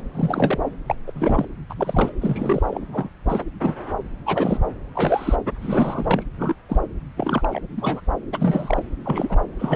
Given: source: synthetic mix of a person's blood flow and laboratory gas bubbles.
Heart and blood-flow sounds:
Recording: Doppler ultrasound of blood flow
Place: subclavian vein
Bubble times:
0.13-0.59 s: bubbles
0.88-0.95 s: bubbles
1.07-1.11 s: bubbles
1.15-1.46 s: bubbles
1.70-2.12 s: bubbles
2.20-2.78 s: bubbles
2.92-3.10 s: bubbles
3.25-3.44 s: bubbles
3.60-3.73 s: bubbles
4.26-4.61 s: bubbles
4.95-5.36 s: bubbles
5.59-6.24 s: bubbles
6.39-6.54 s: bubbles
6.68-6.80 s: bubbles
7.17-7.59 s: bubbles
7.74-8.08 s: bubbles
8.32-8.83 s: bubbles
9.05-9.38 s: bubbles
9.59-9.76 s: bubbles
From the record:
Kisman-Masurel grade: 242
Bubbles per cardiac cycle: several, 3 to 8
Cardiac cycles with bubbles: 100%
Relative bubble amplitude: moderate (0.250 to 0.450)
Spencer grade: 3 (all of the cardiac periods contain showers or single bubble signals, but not dominating or overriding the cardiac motion signals)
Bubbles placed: anywhere in the cardiac cycle

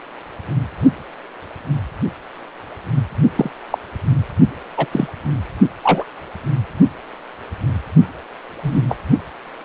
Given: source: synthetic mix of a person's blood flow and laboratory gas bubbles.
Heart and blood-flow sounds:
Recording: Doppler ultrasound of blood flow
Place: precordium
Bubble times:
3.36-3.50 s: bubbles
3.71-3.78 s: bubbles
4.77-4.88 s: bubbles
4.91-5.08 s: bubbles
5.83-6.05 s: bubbles
8.62-8.81 s: bubbles
8.88-8.97 s: bubbles
From the record:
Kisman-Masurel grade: 123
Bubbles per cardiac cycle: 1 to 2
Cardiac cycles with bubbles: 10 to 50%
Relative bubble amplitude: loud (0.450 to 0.775)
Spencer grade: 2 (many but less than half of the cardiac periods contain bubble signals, singularly or in groups)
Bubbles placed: only in the low amplitude regions of the cardiac cycle

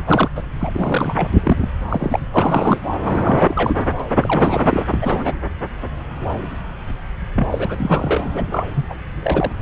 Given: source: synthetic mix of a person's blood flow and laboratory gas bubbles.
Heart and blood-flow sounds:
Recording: Doppler ultrasound of blood flow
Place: subclavian vein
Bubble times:
0.07-0.28 s: bubbles
0.35-0.42 s: bubbles
0.59-0.71 s: bubbles
0.74-1.28 s: bubbles
1.43-1.69 s: bubbles
1.89-2.19 s: bubbles
2.33-2.79 s: bubbles
3.05-3.77 s: bubbles
3.99-4.03 s: bubbles
4.15-4.85 s: bubbles
4.90-5.36 s: bubbles
7.35-7.48 s: bubbles
7.51-8.42 s: bubbles
8.50-8.65 s: bubbles
8.74-8.85 s: bubbles
8.90-8.95 s: bubbles
9.22-9.52 s: bubbles
From the record:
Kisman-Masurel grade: 332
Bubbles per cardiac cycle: rolling drumbeat, 9 or more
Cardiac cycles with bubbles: 50 to 99%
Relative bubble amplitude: moderate (0.250 to 0.450)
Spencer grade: 3 (all of the cardiac periods contain showers or single bubble signals, but not dominating or overriding the cardiac motion signals)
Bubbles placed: anywhere in the cardiac cycle

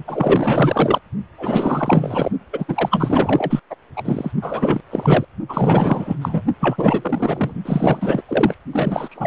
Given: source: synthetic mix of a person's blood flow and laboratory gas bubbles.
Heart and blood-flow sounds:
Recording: Doppler ultrasound of blood flow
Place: precordium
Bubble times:
0.07-0.99 s: bubbles
1.38-2.29 s: bubbles
2.53-2.66 s: bubbles
2.68-3.60 s: bubbles
3.70-3.75 s: bubbles
3.96-4.32 s: bubbles
4.42-4.81 s: bubbles
4.90-5.25 s: bubbles
5.49-6.16 s: bubbles
6.21-6.42 s: bubbles
6.60-7.54 s: bubbles
7.65-8.22 s: bubbles
8.29-8.54 s: bubbles
8.72-9.27 s: bubbles
From the record:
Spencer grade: 4 (maximum detectable bubble signal sounding continuously throughout systole and diastole of every cardiac period, and overriding the amplitude of the normal cardiac signals)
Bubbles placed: only in the low amplitude regions of the cardiac cycle

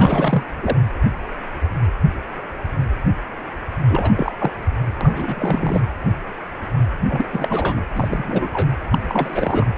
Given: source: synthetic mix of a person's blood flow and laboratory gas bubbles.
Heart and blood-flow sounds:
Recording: Doppler ultrasound of blood flow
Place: precordium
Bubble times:
0.00-0.43 s: bubbles
0.61-0.76 s: bubbles
3.89-4.11 s: bubbles
4.17-4.33 s: bubbles
4.38-4.51 s: bubbles
5.01-5.82 s: bubbles
7.08-7.28 s: bubbles
7.32-7.81 s: bubbles
7.94-8.48 s: bubbles
8.51-8.76 s: bubbles
8.91-9.71 s: bubbles
From the record:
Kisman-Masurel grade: 332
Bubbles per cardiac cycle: rolling drumbeat, 9 or more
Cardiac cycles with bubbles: 50 to 99%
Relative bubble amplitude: moderate (0.250 to 0.450)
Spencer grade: 3 (all of the cardiac periods contain showers or single bubble signals, but not dominating or overriding the cardiac motion signals)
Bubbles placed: anywhere in the cardiac cycle

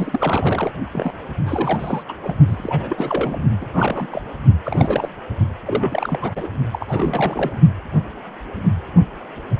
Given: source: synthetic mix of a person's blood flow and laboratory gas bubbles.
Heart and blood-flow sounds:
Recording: Doppler ultrasound of blood flow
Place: precordium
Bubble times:
0.00-0.72 s: bubbles
0.93-1.11 s: bubbles
1.46-2.02 s: bubbles
2.08-2.15 s: bubbles
2.22-2.35 s: bubbles
2.47-3.42 s: bubbles
3.61-3.67 s: bubbles
3.72-4.21 s: bubbles
4.64-5.08 s: bubbles
5.65-6.33 s: bubbles
6.36-6.47 s: bubbles
6.71-7.60 s: bubbles
From the record:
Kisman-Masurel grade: 332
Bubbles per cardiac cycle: rolling drumbeat, 9 or more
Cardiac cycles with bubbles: 50 to 99%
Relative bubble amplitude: moderate (0.250 to 0.450)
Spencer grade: 3 (all of the cardiac periods contain showers or single bubble signals, but not dominating or overriding the cardiac motion signals)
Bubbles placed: only in the low amplitude regions of the cardiac cycle

